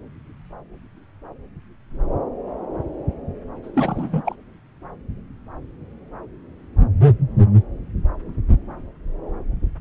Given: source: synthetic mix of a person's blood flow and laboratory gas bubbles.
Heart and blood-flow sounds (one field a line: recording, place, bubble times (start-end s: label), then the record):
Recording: Doppler ultrasound of blood flow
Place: subclavian vein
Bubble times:
3.63-4.23 s: bubbles
4.25-4.35 s: bubbles
From the record:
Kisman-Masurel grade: 212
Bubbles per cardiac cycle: several, 3 to 8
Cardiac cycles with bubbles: 1 to 10%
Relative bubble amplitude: moderate (0.250 to 0.450)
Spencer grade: 1 (occasional bubble signal discernible with the cardiac motion signal, with majority of cardiac periods free of bubbles)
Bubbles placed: anywhere in the cardiac cycle